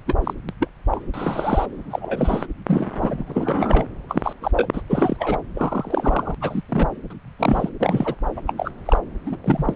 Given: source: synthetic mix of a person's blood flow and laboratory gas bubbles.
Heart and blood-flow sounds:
Doppler ultrasound of blood flow; subclavian vein
0.07-0.16 s: bubbles
0.24-0.33 s: bubbles
0.48-0.54 s: bubbles
0.60-0.68 s: bubbles
0.91-1.00 s: bubbles
1.14-1.66 s: bubbles
1.90-2.46 s: bubbles
2.66-3.84 s: bubbles
4.09-4.33 s: bubbles
4.42-4.51 s: bubbles
4.54-4.68 s: bubbles
4.73-4.82 s: bubbles
4.89-5.38 s: bubbles
5.54-6.35 s: bubbles
6.41-6.62 s: bubbles
6.69-6.88 s: bubbles
7.10-7.13 s: bubbles
7.39-7.70 s: bubbles
7.80-8.15 s: bubbles
8.37-8.41 s: bubbles
8.47-8.53 s: bubbles
8.57-8.71 s: bubbles
8.85-9.00 s: bubbles
9.26-9.37 s: bubbles
9.44-9.74 s: bubbles
From the record:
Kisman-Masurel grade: 242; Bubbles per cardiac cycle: several, 3 to 8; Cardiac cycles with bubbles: 100%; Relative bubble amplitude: moderate (0.250 to 0.450); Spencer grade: 3 (all of the cardiac periods contain showers or single bubble signals, but not dominating or overriding the cardiac motion signals); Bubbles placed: anywhere in the cardiac cycle

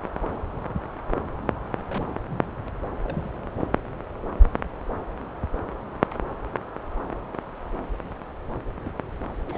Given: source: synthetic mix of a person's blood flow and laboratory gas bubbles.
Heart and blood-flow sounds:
Doppler ultrasound of blood flow; subclavian vein
1.89-2.03 s: bubbles
2.31-2.47 s: bubbles
3.04-3.30 s: bubbles
8.84-8.92 s: bubbles
9.46-9.58 s: bubbles
From the record:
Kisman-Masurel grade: 221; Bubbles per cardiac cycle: several, 3 to 8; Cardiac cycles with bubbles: 10 to 50%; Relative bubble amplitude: barely perceptible (0.100 to 0.250); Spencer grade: 2 (many but less than half of the cardiac periods contain bubble signals, singularly or in groups); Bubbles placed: anywhere in the cardiac cycle

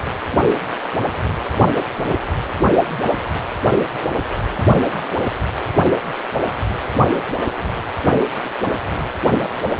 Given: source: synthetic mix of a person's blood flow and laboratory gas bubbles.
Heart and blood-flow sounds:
Doppler ultrasound of blood flow; precordium
2.06-2.18 s: bubbles
From the record:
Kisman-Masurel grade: 122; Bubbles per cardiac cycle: 1 to 2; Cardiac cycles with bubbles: 10 to 50%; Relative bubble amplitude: moderate (0.250 to 0.450); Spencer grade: 2 (many but less than half of the cardiac periods contain bubble signals, singularly or in groups); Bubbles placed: only in the low amplitude regions of the cardiac cycle

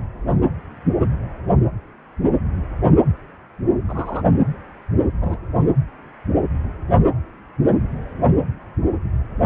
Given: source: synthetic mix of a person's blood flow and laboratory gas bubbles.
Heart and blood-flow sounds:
Doppler ultrasound of blood flow; precordium
3.88-4.22 s: bubbles
5.21-5.38 s: bubbles
From the record:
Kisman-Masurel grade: 122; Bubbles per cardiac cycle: 1 to 2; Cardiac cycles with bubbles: 10 to 50%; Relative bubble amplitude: moderate (0.250 to 0.450); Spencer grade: 2 (many but less than half of the cardiac periods contain bubble signals, singularly or in groups); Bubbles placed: anywhere in the cardiac cycle

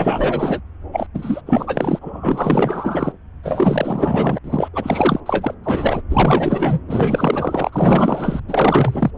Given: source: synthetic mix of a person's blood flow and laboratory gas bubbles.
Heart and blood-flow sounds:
Doppler ultrasound of blood flow; subclavian vein
0.00-0.61 s: bubbles
0.92-1.07 s: bubbles
1.14-1.42 s: bubbles
1.46-3.12 s: bubbles
3.42-4.39 s: bubbles
4.44-4.69 s: bubbles
4.74-5.21 s: bubbles
5.25-5.54 s: bubbles
5.64-6.02 s: bubbles
6.10-6.79 s: bubbles
6.88-8.40 s: bubbles
8.48-9.10 s: bubbles
From the record:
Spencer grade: 4 (maximum detectable bubble signal sounding continuously throughout systole and diastole of every cardiac period, and overriding the amplitude of the normal cardiac signals); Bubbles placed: anywhere in the cardiac cycle

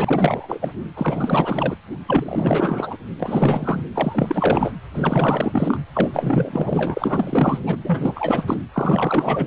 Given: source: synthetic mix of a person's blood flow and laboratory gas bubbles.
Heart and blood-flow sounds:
Doppler ultrasound of blood flow; precordium
0.00-0.72 s: bubbles
0.96-1.75 s: bubbles
2.07-2.96 s: bubbles
3.19-3.83 s: bubbles
3.94-4.73 s: bubbles
4.94-5.80 s: bubbles
5.94-7.59 s: bubbles
7.66-7.78 s: bubbles
7.83-8.56 s: bubbles
8.72-9.46 s: bubbles
From the record:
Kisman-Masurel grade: 444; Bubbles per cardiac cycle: continuous sound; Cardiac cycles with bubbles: 100%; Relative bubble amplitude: maximal (0.775 to 0.999); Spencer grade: 4 (maximum detectable bubble signal sounding continuously throughout systole and diastole of every cardiac period, and overriding the amplitude of the normal cardiac signals); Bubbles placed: anywhere in the cardiac cycle

